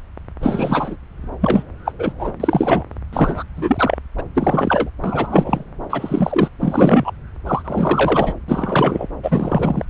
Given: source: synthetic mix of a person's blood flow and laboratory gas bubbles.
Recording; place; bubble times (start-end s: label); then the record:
Doppler ultrasound of blood flow; subclavian vein
0.41-0.97 s: bubbles
1.41-1.64 s: bubbles
1.85-1.92 s: bubbles
1.98-2.12 s: bubbles
2.18-2.32 s: bubbles
2.40-2.84 s: bubbles
3.12-3.44 s: bubbles
3.56-3.98 s: bubbles
4.17-4.23 s: bubbles
4.34-4.90 s: bubbles
5.04-5.63 s: bubbles
5.89-6.50 s: bubbles
6.59-7.11 s: bubbles
7.46-8.34 s: bubbles
8.48-9.08 s: bubbles
9.23-9.86 s: bubbles
From the record:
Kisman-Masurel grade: 333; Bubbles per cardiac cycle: rolling drumbeat, 9 or more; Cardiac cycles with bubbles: 50 to 99%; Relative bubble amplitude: loud (0.450 to 0.775); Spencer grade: 3 (all of the cardiac periods contain showers or single bubble signals, but not dominating or overriding the cardiac motion signals); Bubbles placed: anywhere in the cardiac cycle